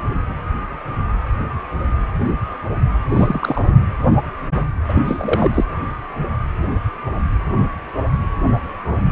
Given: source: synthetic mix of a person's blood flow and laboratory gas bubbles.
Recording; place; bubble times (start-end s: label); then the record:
Doppler ultrasound of blood flow; precordium
3.11-3.65 s: bubbles
4.88-5.65 s: bubbles
From the record:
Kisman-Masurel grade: 222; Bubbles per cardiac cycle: several, 3 to 8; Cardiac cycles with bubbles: 10 to 50%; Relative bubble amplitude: moderate (0.250 to 0.450); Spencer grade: 2 (many but less than half of the cardiac periods contain bubble signals, singularly or in groups); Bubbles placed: anywhere in the cardiac cycle